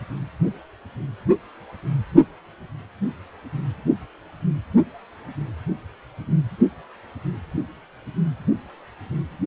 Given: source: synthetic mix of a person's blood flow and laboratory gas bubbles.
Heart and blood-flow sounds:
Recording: Doppler ultrasound of blood flow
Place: precordium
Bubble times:
no bubbles
From the record:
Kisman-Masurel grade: 000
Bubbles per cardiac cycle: 0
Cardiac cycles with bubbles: 0%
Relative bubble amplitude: no bubbles discernible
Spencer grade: 0 (complete lack of bubble signals)

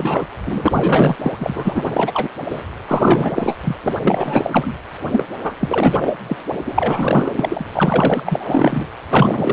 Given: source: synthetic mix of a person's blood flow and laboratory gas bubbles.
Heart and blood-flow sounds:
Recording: Doppler ultrasound of blood flow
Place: precordium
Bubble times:
0.00-0.29 s: bubbles
0.43-1.16 s: bubbles
1.21-2.29 s: bubbles
2.50-2.62 s: bubbles
2.86-3.56 s: bubbles
3.63-3.76 s: bubbles
3.83-3.93 s: bubbles
4.03-4.72 s: bubbles
5.12-5.25 s: bubbles
5.43-5.54 s: bubbles
5.60-6.13 s: bubbles
6.28-6.36 s: bubbles
6.66-7.32 s: bubbles
7.35-7.65 s: bubbles
7.74-8.87 s: bubbles
9.11-9.53 s: bubbles
From the record:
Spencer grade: 4 (maximum detectable bubble signal sounding continuously throughout systole and diastole of every cardiac period, and overriding the amplitude of the normal cardiac signals)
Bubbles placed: anywhere in the cardiac cycle

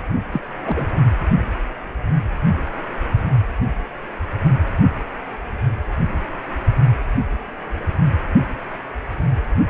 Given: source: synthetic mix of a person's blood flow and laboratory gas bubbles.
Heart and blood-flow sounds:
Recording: Doppler ultrasound of blood flow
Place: precordium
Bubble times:
0.33-0.41 s: bubbles
0.66-0.88 s: bubbles
From the record:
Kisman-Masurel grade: 112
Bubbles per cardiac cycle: 1 to 2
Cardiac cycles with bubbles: 1 to 10%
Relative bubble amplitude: moderate (0.250 to 0.450)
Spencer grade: 1 (occasional bubble signal discernible with the cardiac motion signal, with majority of cardiac periods free of bubbles)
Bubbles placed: anywhere in the cardiac cycle

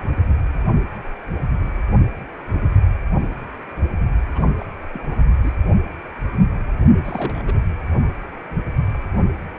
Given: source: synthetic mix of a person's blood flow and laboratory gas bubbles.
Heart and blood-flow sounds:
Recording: Doppler ultrasound of blood flow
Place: precordium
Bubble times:
4.35-4.39 s: bubbles
4.58-4.65 s: bubbles
4.94-5.01 s: bubbles
5.12-5.14 s: bubbles
5.43-5.52 s: bubbles
6.95-7.00 s: bubbles
7.04-7.62 s: bubbles
From the record:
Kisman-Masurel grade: 221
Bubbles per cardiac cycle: several, 3 to 8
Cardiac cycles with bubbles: 10 to 50%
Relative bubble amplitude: barely perceptible (0.100 to 0.250)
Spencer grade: 2 (many but less than half of the cardiac periods contain bubble signals, singularly or in groups)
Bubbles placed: anywhere in the cardiac cycle

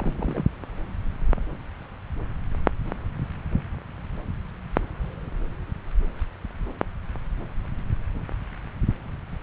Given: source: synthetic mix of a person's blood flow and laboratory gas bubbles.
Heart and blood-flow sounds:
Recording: Doppler ultrasound of blood flow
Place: subclavian vein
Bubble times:
0.00-0.45 s: bubbles
From the record:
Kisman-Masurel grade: 111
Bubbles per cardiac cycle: 1 to 2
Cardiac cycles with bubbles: 1 to 10%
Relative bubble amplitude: barely perceptible (0.100 to 0.250)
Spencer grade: 1 (occasional bubble signal discernible with the cardiac motion signal, with majority of cardiac periods free of bubbles)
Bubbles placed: anywhere in the cardiac cycle

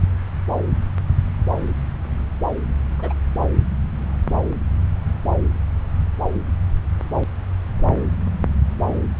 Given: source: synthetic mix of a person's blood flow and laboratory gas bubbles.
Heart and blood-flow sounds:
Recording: Doppler ultrasound of blood flow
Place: subclavian vein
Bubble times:
2.98-3.13 s: bubbles
From the record:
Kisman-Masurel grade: 121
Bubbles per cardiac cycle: 1 to 2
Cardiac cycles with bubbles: 10 to 50%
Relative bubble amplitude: barely perceptible (0.100 to 0.250)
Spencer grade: 2 (many but less than half of the cardiac periods contain bubble signals, singularly or in groups)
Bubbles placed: anywhere in the cardiac cycle

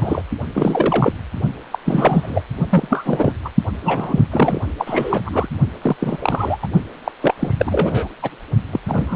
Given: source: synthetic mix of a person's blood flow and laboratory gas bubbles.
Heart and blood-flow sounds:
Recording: Doppler ultrasound of blood flow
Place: precordium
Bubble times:
0.00-0.22 s: bubbles
0.54-1.14 s: bubbles
1.72-1.79 s: bubbles
1.85-2.43 s: bubbles
2.69-3.32 s: bubbles
3.44-3.50 s: bubbles
3.84-4.26 s: bubbles
4.30-4.61 s: bubbles
4.78-5.21 s: bubbles
5.25-5.47 s: bubbles
5.81-5.96 s: bubbles
6.01-6.18 s: bubbles
6.20-6.57 s: bubbles
6.62-6.68 s: bubbles
7.04-7.12 s: bubbles
7.21-7.34 s: bubbles
7.40-7.53 s: bubbles
7.57-8.08 s: bubbles
8.22-8.30 s: bubbles
8.72-8.79 s: bubbles
8.86-9.16 s: bubbles
From the record:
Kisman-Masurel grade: 343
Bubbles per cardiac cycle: rolling drumbeat, 9 or more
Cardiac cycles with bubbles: 100%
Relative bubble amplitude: loud (0.450 to 0.775)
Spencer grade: 3 (all of the cardiac periods contain showers or single bubble signals, but not dominating or overriding the cardiac motion signals)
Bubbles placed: only in the low amplitude regions of the cardiac cycle

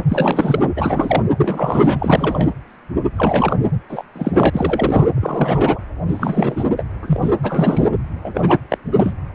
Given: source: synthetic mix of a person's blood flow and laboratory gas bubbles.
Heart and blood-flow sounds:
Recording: Doppler ultrasound of blood flow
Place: precordium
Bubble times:
0.09-0.59 s: bubbles
0.74-1.22 s: bubbles
1.38-2.50 s: bubbles
3.17-3.56 s: bubbles
3.88-4.04 s: bubbles
4.14-4.50 s: bubbles
4.52-5.07 s: bubbles
5.16-5.79 s: bubbles
6.08-6.69 s: bubbles
6.77-6.85 s: bubbles
7.03-7.29 s: bubbles
7.43-7.92 s: bubbles
8.24-8.58 s: bubbles
8.69-8.78 s: bubbles
8.96-9.11 s: bubbles
From the record:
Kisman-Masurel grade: 333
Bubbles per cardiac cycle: rolling drumbeat, 9 or more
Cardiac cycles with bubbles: 50 to 99%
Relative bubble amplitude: loud (0.450 to 0.775)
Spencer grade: 3 (all of the cardiac periods contain showers or single bubble signals, but not dominating or overriding the cardiac motion signals)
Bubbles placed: anywhere in the cardiac cycle

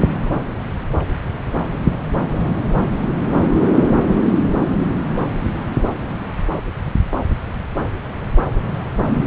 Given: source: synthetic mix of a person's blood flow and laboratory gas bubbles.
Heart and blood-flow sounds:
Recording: Doppler ultrasound of blood flow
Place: subclavian vein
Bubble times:
no bubbles
From the record:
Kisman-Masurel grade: 000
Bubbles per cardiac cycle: 0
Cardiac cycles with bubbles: 0%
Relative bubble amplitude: no bubbles discernible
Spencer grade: 0 (complete lack of bubble signals)

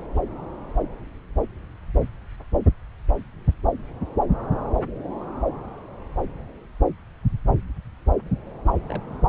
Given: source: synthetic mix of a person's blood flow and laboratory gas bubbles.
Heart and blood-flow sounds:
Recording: Doppler ultrasound of blood flow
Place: subclavian vein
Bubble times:
8.88-9.02 s: bubbles
From the record:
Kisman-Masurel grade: 111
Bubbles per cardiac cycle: 1 to 2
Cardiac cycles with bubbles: 1 to 10%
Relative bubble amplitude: barely perceptible (0.100 to 0.250)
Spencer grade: 1 (occasional bubble signal discernible with the cardiac motion signal, with majority of cardiac periods free of bubbles)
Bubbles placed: anywhere in the cardiac cycle

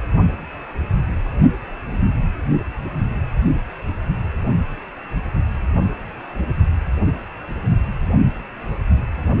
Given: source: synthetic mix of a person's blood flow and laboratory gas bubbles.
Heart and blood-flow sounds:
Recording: Doppler ultrasound of blood flow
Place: precordium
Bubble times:
no bubbles
From the record:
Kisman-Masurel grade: 000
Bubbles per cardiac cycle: 0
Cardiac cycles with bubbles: 0%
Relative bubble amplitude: no bubbles discernible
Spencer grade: 0 (complete lack of bubble signals)

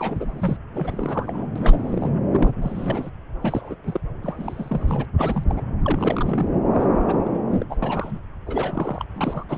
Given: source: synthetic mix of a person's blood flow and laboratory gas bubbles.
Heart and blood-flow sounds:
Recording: Doppler ultrasound of blood flow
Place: subclavian vein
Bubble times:
0.00-0.57 s: bubbles
0.73-1.48 s: bubbles
1.55-2.10 s: bubbles
2.32-3.10 s: bubbles
3.42-3.75 s: bubbles
3.84-4.01 s: bubbles
4.23-5.06 s: bubbles
5.17-5.44 s: bubbles
5.47-5.61 s: bubbles
5.84-6.49 s: bubbles
6.74-6.86 s: bubbles
6.94-7.02 s: bubbles
7.08-7.20 s: bubbles
7.24-7.31 s: bubbles
7.34-7.39 s: bubbles
7.52-7.65 s: bubbles
7.70-7.76 s: bubbles
7.82-8.20 s: bubbles
8.46-9.05 s: bubbles
9.15-9.45 s: bubbles
9.49-9.58 s: bubbles
From the record:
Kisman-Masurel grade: 342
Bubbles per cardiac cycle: rolling drumbeat, 9 or more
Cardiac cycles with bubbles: 100%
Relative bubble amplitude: moderate (0.250 to 0.450)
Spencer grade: 3 (all of the cardiac periods contain showers or single bubble signals, but not dominating or overriding the cardiac motion signals)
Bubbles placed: anywhere in the cardiac cycle

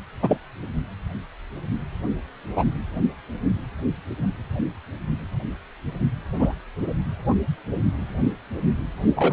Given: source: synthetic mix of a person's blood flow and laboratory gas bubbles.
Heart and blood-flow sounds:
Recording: Doppler ultrasound of blood flow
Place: precordium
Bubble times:
0.23-0.37 s: bubbles
2.55-2.64 s: bubbles
6.39-6.54 s: bubbles
9.16-9.33 s: bubbles
From the record:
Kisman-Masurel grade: 123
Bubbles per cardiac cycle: 1 to 2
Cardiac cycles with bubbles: 10 to 50%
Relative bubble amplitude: loud (0.450 to 0.775)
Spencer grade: 2 (many but less than half of the cardiac periods contain bubble signals, singularly or in groups)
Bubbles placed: only in the low amplitude regions of the cardiac cycle

